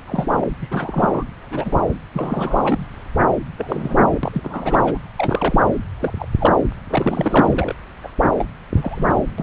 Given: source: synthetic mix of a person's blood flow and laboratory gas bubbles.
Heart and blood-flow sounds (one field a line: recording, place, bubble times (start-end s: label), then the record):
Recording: Doppler ultrasound of blood flow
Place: subclavian vein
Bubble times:
0.06-0.44 s: bubbles
0.61-0.68 s: bubbles
0.71-1.24 s: bubbles
1.50-1.77 s: bubbles
2.13-2.86 s: bubbles
3.58-4.20 s: bubbles
4.23-4.80 s: bubbles
4.83-4.98 s: bubbles
5.17-5.60 s: bubbles
5.97-6.27 s: bubbles
6.39-6.54 s: bubbles
6.89-7.75 s: bubbles
8.04-8.11 s: bubbles
8.38-8.45 s: bubbles
8.76-9.16 s: bubbles
9.38-9.43 s: bubbles
From the record:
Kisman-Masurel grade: 242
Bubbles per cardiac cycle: several, 3 to 8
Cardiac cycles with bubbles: 100%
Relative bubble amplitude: moderate (0.250 to 0.450)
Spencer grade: 3 (all of the cardiac periods contain showers or single bubble signals, but not dominating or overriding the cardiac motion signals)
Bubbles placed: anywhere in the cardiac cycle